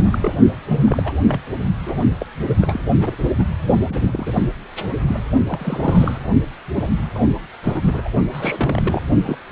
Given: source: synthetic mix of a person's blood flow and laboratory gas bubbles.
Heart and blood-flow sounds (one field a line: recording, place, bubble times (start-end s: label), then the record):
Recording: Doppler ultrasound of blood flow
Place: precordium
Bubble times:
0.00-0.18 s: bubbles
0.22-0.35 s: bubbles
0.67-1.12 s: bubbles
1.27-1.40 s: bubbles
1.86-2.05 s: bubbles
2.20-2.26 s: bubbles
2.49-2.54 s: bubbles
2.62-2.81 s: bubbles
2.98-3.16 s: bubbles
3.38-3.45 s: bubbles
3.88-4.33 s: bubbles
5.07-5.20 s: bubbles
5.48-6.18 s: bubbles
6.75-6.92 s: bubbles
7.15-7.22 s: bubbles
7.63-7.82 s: bubbles
7.84-8.01 s: bubbles
8.04-8.08 s: bubbles
8.33-9.01 s: bubbles
9.23-9.38 s: bubbles
From the record:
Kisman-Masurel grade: 242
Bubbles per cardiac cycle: several, 3 to 8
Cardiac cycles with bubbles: 100%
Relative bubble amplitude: moderate (0.250 to 0.450)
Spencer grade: 3 (all of the cardiac periods contain showers or single bubble signals, but not dominating or overriding the cardiac motion signals)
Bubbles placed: only in the low amplitude regions of the cardiac cycle